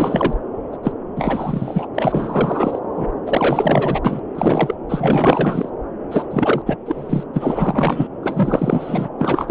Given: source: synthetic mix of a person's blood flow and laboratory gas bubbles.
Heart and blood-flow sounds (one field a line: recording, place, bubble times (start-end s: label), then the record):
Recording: Doppler ultrasound of blood flow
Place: subclavian vein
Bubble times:
0.00-0.34 s: bubbles
0.72-0.77 s: bubbles
0.83-0.92 s: bubbles
1.16-1.87 s: bubbles
1.95-2.79 s: bubbles
2.96-3.05 s: bubbles
3.26-4.00 s: bubbles
4.04-4.20 s: bubbles
4.35-4.75 s: bubbles
4.89-5.70 s: bubbles
6.11-6.27 s: bubbles
6.31-6.62 s: bubbles
6.66-6.77 s: bubbles
6.86-7.26 s: bubbles
7.33-8.08 s: bubbles
8.23-9.09 s: bubbles
9.19-9.50 s: bubbles
From the record:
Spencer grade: 4 (maximum detectable bubble signal sounding continuously throughout systole and diastole of every cardiac period, and overriding the amplitude of the normal cardiac signals)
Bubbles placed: anywhere in the cardiac cycle